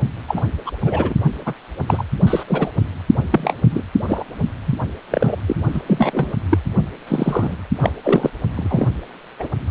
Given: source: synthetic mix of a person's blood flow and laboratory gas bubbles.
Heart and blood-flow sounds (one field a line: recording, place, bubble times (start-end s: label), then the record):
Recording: Doppler ultrasound of blood flow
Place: precordium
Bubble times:
0.28-0.41 s: bubbles
0.66-0.71 s: bubbles
0.84-1.15 s: bubbles
1.45-1.53 s: bubbles
1.87-2.04 s: bubbles
2.26-2.43 s: bubbles
2.47-2.70 s: bubbles
3.32-3.53 s: bubbles
3.71-3.81 s: bubbles
4.08-4.23 s: bubbles
4.66-4.76 s: bubbles
5.10-5.35 s: bubbles
5.46-5.56 s: bubbles
5.72-5.81 s: bubbles
5.87-6.33 s: bubbles
6.49-6.58 s: bubbles
7.07-7.56 s: bubbles
7.82-7.92 s: bubbles
8.03-8.30 s: bubbles
8.56-8.87 s: bubbles
9.39-9.48 s: bubbles
9.67-9.71 s: bubbles
From the record:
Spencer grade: 3 (all of the cardiac periods contain showers or single bubble signals, but not dominating or overriding the cardiac motion signals)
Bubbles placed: only in the low amplitude regions of the cardiac cycle